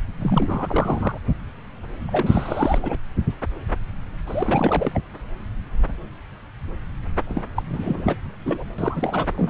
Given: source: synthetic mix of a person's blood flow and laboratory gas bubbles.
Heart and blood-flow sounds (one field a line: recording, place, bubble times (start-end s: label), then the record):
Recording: Doppler ultrasound of blood flow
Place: subclavian vein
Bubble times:
0.18-1.18 s: bubbles
2.06-2.98 s: bubbles
4.27-5.01 s: bubbles
7.27-7.43 s: bubbles
7.55-7.62 s: bubbles
7.73-8.17 s: bubbles
8.45-8.64 s: bubbles
8.78-9.28 s: bubbles
9.37-9.50 s: bubbles
From the record:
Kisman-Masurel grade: 332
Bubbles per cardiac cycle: rolling drumbeat, 9 or more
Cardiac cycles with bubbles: 50 to 99%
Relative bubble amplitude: moderate (0.250 to 0.450)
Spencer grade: 3 (all of the cardiac periods contain showers or single bubble signals, but not dominating or overriding the cardiac motion signals)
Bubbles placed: anywhere in the cardiac cycle